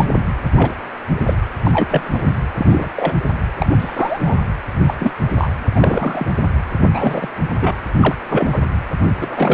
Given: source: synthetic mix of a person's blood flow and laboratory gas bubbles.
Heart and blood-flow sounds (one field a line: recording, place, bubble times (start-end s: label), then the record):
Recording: Doppler ultrasound of blood flow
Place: precordium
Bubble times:
0.00-0.06 s: bubbles
0.56-0.72 s: bubbles
1.26-1.33 s: bubbles
1.63-2.10 s: bubbles
2.13-2.33 s: bubbles
2.57-2.91 s: bubbles
2.95-3.19 s: bubbles
3.58-4.34 s: bubbles
4.86-4.95 s: bubbles
5.00-5.13 s: bubbles
5.38-5.50 s: bubbles
5.75-6.26 s: bubbles
6.92-7.28 s: bubbles
7.59-7.73 s: bubbles
8.00-8.16 s: bubbles
8.29-8.60 s: bubbles
9.19-9.54 s: bubbles
From the record:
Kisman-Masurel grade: 242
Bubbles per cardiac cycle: several, 3 to 8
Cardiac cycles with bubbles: 100%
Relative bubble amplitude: moderate (0.250 to 0.450)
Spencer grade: 3 (all of the cardiac periods contain showers or single bubble signals, but not dominating or overriding the cardiac motion signals)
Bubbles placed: anywhere in the cardiac cycle